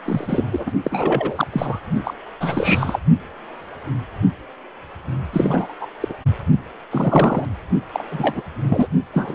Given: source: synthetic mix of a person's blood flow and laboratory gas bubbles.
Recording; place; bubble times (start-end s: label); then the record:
Doppler ultrasound of blood flow; precordium
0.04-0.45 s: bubbles
0.51-0.70 s: bubbles
0.83-1.47 s: bubbles
1.51-1.79 s: bubbles
2.04-2.14 s: bubbles
2.40-2.99 s: bubbles
5.33-5.74 s: bubbles
5.81-5.87 s: bubbles
6.00-6.13 s: bubbles
6.91-7.45 s: bubbles
7.93-8.04 s: bubbles
8.10-8.41 s: bubbles
8.62-8.88 s: bubbles
9.13-9.35 s: bubbles
From the record:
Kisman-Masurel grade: 333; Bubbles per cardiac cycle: rolling drumbeat, 9 or more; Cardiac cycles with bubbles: 50 to 99%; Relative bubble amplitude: loud (0.450 to 0.775); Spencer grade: 3 (all of the cardiac periods contain showers or single bubble signals, but not dominating or overriding the cardiac motion signals); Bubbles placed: only in the low amplitude regions of the cardiac cycle